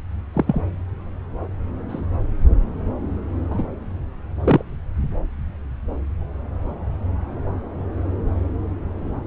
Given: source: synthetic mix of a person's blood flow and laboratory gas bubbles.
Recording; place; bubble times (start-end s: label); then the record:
Doppler ultrasound of blood flow; subclavian vein
0.33-0.62 s: bubbles
1.89-2.06 s: bubbles
3.50-3.67 s: bubbles
4.44-4.63 s: bubbles
From the record:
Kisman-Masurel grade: 122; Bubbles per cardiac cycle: 1 to 2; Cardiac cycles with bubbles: 10 to 50%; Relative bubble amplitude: moderate (0.250 to 0.450); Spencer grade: 2 (many but less than half of the cardiac periods contain bubble signals, singularly or in groups); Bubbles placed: anywhere in the cardiac cycle